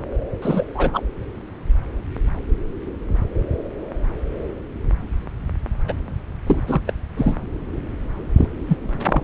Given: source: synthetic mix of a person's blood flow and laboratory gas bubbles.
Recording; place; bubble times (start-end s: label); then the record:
Doppler ultrasound of blood flow; subclavian vein
0.41-0.66 s: bubbles
0.74-1.02 s: bubbles
5.88-5.93 s: bubbles
6.47-6.61 s: bubbles
6.67-6.81 s: bubbles
6.87-6.93 s: bubbles
7.17-7.37 s: bubbles
8.37-8.48 s: bubbles
8.67-8.77 s: bubbles
8.83-9.24 s: bubbles
From the record:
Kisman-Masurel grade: 222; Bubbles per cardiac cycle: several, 3 to 8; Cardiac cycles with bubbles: 10 to 50%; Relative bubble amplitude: moderate (0.250 to 0.450); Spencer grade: 2 (many but less than half of the cardiac periods contain bubble signals, singularly or in groups); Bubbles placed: anywhere in the cardiac cycle